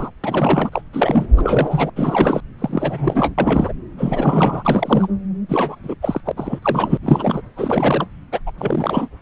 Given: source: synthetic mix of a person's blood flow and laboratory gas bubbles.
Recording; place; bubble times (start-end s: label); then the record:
Doppler ultrasound of blood flow; subclavian vein
0.00-0.10 s: bubbles
0.23-0.69 s: bubbles
0.72-0.82 s: bubbles
0.93-1.26 s: bubbles
1.37-1.90 s: bubbles
1.96-2.40 s: bubbles
2.58-3.34 s: bubbles
3.38-3.73 s: bubbles
3.98-5.07 s: bubbles
5.49-5.75 s: bubbles
5.83-5.95 s: bubbles
6.01-6.21 s: bubbles
6.25-6.32 s: bubbles
6.37-6.59 s: bubbles
6.62-6.97 s: bubbles
7.02-7.41 s: bubbles
7.57-8.06 s: bubbles
8.31-8.40 s: bubbles
8.46-8.52 s: bubbles
8.58-9.08 s: bubbles
From the record:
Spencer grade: 3 (all of the cardiac periods contain showers or single bubble signals, but not dominating or overriding the cardiac motion signals); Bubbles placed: anywhere in the cardiac cycle